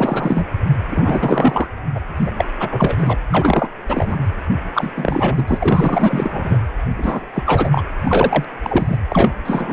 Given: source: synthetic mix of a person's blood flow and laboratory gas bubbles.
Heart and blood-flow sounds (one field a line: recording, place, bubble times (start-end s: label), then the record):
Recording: Doppler ultrasound of blood flow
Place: precordium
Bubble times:
0.00-0.45 s: bubbles
0.91-1.68 s: bubbles
1.94-2.00 s: bubbles
2.17-2.31 s: bubbles
2.37-2.44 s: bubbles
2.59-3.19 s: bubbles
3.30-3.69 s: bubbles
3.88-4.16 s: bubbles
4.73-4.92 s: bubbles
4.97-5.43 s: bubbles
5.47-6.58 s: bubbles
6.98-7.26 s: bubbles
7.33-7.82 s: bubbles
8.04-8.45 s: bubbles
8.62-8.98 s: bubbles
9.09-9.32 s: bubbles
9.45-9.73 s: bubbles
From the record:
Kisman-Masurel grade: 343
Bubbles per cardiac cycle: rolling drumbeat, 9 or more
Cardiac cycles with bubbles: 100%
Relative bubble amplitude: loud (0.450 to 0.775)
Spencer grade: 3 (all of the cardiac periods contain showers or single bubble signals, but not dominating or overriding the cardiac motion signals)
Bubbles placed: anywhere in the cardiac cycle